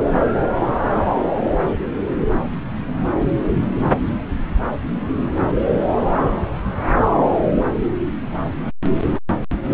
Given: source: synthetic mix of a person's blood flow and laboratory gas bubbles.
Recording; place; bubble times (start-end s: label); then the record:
Doppler ultrasound of blood flow; subclavian vein
no bubbles
From the record:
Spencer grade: 0 (complete lack of bubble signals)